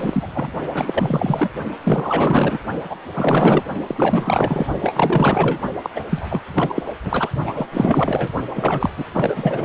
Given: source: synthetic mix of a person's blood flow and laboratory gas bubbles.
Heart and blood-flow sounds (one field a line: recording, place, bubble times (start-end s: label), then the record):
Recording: Doppler ultrasound of blood flow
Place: precordium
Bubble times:
0.00-0.27 s: bubbles
0.34-0.48 s: bubbles
0.73-1.49 s: bubbles
1.83-2.59 s: bubbles
2.90-2.96 s: bubbles
3.14-3.64 s: bubbles
3.87-4.66 s: bubbles
4.81-5.60 s: bubbles
5.83-5.90 s: bubbles
5.96-6.04 s: bubbles
6.10-6.43 s: bubbles
6.54-6.83 s: bubbles
6.85-6.93 s: bubbles
7.04-7.30 s: bubbles
7.45-7.67 s: bubbles
7.71-8.30 s: bubbles
8.54-8.90 s: bubbles
8.96-9.06 s: bubbles
9.12-9.64 s: bubbles
From the record:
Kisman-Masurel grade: 444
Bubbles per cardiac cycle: continuous sound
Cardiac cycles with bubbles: 100%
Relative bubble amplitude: maximal (0.775 to 0.999)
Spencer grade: 4 (maximum detectable bubble signal sounding continuously throughout systole and diastole of every cardiac period, and overriding the amplitude of the normal cardiac signals)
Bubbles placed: only in the low amplitude regions of the cardiac cycle